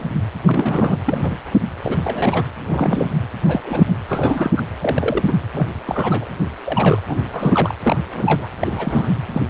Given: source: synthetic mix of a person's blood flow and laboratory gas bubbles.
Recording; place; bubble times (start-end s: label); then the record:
Doppler ultrasound of blood flow; precordium
0.00-0.07 s: bubbles
0.41-0.97 s: bubbles
1.06-1.38 s: bubbles
1.83-2.44 s: bubbles
2.69-3.10 s: bubbles
3.47-3.61 s: bubbles
3.66-3.91 s: bubbles
4.08-4.53 s: bubbles
4.56-4.63 s: bubbles
4.81-5.33 s: bubbles
5.52-5.67 s: bubbles
5.86-6.25 s: bubbles
6.65-7.01 s: bubbles
7.07-7.23 s: bubbles
7.33-7.74 s: bubbles
7.84-8.01 s: bubbles
8.15-8.47 s: bubbles
8.60-9.12 s: bubbles
9.34-9.42 s: bubbles
9.47-9.50 s: bubbles
From the record:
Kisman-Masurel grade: 242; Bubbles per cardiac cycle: several, 3 to 8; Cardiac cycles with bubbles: 100%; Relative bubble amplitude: moderate (0.250 to 0.450); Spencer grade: 3 (all of the cardiac periods contain showers or single bubble signals, but not dominating or overriding the cardiac motion signals); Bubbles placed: anywhere in the cardiac cycle